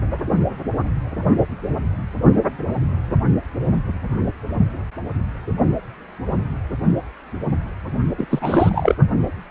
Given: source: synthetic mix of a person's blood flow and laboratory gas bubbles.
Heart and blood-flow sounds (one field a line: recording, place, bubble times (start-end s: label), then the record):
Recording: Doppler ultrasound of blood flow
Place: precordium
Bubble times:
8.17-8.26 s: bubbles
8.30-8.95 s: bubbles
From the record:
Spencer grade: 2 (many but less than half of the cardiac periods contain bubble signals, singularly or in groups)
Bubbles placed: only in the low amplitude regions of the cardiac cycle